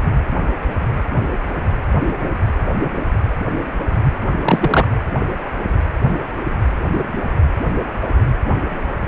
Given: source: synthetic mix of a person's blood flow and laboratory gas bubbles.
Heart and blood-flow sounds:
Doppler ultrasound of blood flow; precordium
4.42-4.88 s: bubbles
From the record:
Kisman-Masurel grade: 113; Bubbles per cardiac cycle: 1 to 2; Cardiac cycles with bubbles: 1 to 10%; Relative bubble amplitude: loud (0.450 to 0.775); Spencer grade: 1 (occasional bubble signal discernible with the cardiac motion signal, with majority of cardiac periods free of bubbles); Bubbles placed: anywhere in the cardiac cycle

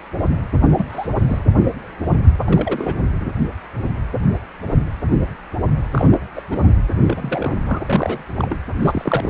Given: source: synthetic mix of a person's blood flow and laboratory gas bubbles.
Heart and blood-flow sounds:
Doppler ultrasound of blood flow; precordium
0.74-1.45 s: bubbles
2.44-2.96 s: bubbles
5.92-6.08 s: bubbles
6.10-6.21 s: bubbles
6.35-6.42 s: bubbles
6.51-6.58 s: bubbles
7.02-7.53 s: bubbles
7.66-7.80 s: bubbles
7.88-8.24 s: bubbles
8.36-8.56 s: bubbles
8.81-9.30 s: bubbles
From the record:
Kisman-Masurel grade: 222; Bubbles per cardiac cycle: several, 3 to 8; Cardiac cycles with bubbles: 10 to 50%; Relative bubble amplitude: moderate (0.250 to 0.450); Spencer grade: 2 (many but less than half of the cardiac periods contain bubble signals, singularly or in groups); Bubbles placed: anywhere in the cardiac cycle

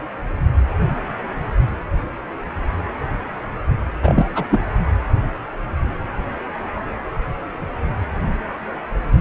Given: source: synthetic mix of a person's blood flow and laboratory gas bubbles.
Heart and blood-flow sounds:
Doppler ultrasound of blood flow; precordium
4.02-4.29 s: bubbles
4.34-4.45 s: bubbles
4.50-4.60 s: bubbles
From the record:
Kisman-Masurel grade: 212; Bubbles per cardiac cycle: several, 3 to 8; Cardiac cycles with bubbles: 1 to 10%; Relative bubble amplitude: moderate (0.250 to 0.450); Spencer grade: 1 (occasional bubble signal discernible with the cardiac motion signal, with majority of cardiac periods free of bubbles); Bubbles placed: anywhere in the cardiac cycle

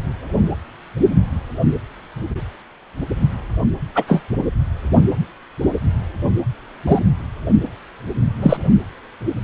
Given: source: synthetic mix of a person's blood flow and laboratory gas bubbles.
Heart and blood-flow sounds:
Doppler ultrasound of blood flow; precordium
3.94-4.04 s: bubbles
4.08-4.22 s: bubbles
6.87-6.99 s: bubbles
8.42-8.57 s: bubbles
From the record:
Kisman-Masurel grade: 123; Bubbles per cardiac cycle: 1 to 2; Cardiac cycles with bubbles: 10 to 50%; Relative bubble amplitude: loud (0.450 to 0.775); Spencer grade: 2 (many but less than half of the cardiac periods contain bubble signals, singularly or in groups); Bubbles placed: anywhere in the cardiac cycle

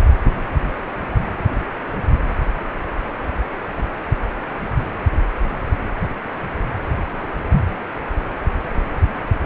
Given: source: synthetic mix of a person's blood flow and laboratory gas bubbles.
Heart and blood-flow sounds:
Doppler ultrasound of blood flow; precordium
no bubbles
From the record:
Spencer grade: 0 (complete lack of bubble signals)

